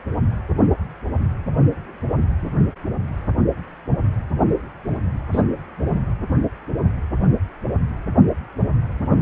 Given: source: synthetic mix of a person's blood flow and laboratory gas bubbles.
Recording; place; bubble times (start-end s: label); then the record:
Doppler ultrasound of blood flow; precordium
5.33-5.42 s: bubbles
From the record:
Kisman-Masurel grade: 112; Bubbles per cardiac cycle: 1 to 2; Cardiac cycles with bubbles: 1 to 10%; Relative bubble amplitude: moderate (0.250 to 0.450); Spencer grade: 1 (occasional bubble signal discernible with the cardiac motion signal, with majority of cardiac periods free of bubbles); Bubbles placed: anywhere in the cardiac cycle